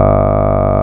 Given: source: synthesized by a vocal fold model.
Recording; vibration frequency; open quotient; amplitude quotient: sustained vowel; 50 Hz; 0.4; 1.2